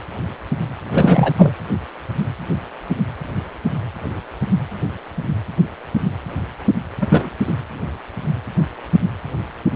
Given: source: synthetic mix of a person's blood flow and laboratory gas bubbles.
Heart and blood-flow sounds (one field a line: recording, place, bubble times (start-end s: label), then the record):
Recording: Doppler ultrasound of blood flow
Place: precordium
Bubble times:
0.92-1.33 s: bubbles
1.36-1.51 s: bubbles
7.01-7.30 s: bubbles
7.46-7.53 s: bubbles
From the record:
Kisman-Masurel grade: 213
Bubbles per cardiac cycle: several, 3 to 8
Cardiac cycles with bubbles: 1 to 10%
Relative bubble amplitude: loud (0.450 to 0.775)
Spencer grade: 1 (occasional bubble signal discernible with the cardiac motion signal, with majority of cardiac periods free of bubbles)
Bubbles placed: anywhere in the cardiac cycle